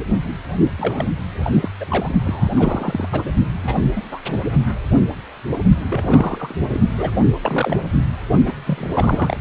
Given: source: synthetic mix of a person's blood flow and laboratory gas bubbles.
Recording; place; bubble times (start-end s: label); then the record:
Doppler ultrasound of blood flow; precordium
0.10-0.34 s: bubbles
0.77-1.05 s: bubbles
1.43-1.70 s: bubbles
1.80-1.85 s: bubbles
1.90-2.09 s: bubbles
2.25-2.49 s: bubbles
2.54-3.08 s: bubbles
3.12-3.22 s: bubbles
3.63-3.75 s: bubbles
3.96-4.03 s: bubbles
4.11-4.20 s: bubbles
4.26-4.42 s: bubbles
5.88-6.54 s: bubbles
6.68-6.80 s: bubbles
6.97-7.11 s: bubbles
7.42-7.79 s: bubbles
8.45-8.54 s: bubbles
8.66-9.37 s: bubbles
From the record:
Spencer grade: 3 (all of the cardiac periods contain showers or single bubble signals, but not dominating or overriding the cardiac motion signals); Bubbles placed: only in the low amplitude regions of the cardiac cycle